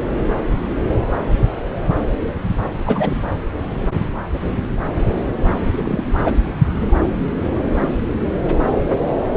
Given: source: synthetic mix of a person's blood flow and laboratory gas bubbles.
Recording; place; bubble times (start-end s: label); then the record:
Doppler ultrasound of blood flow; subclavian vein
2.86-3.21 s: bubbles
5.72-6.04 s: bubbles
6.18-6.33 s: bubbles
From the record:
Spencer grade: 2 (many but less than half of the cardiac periods contain bubble signals, singularly or in groups); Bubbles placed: anywhere in the cardiac cycle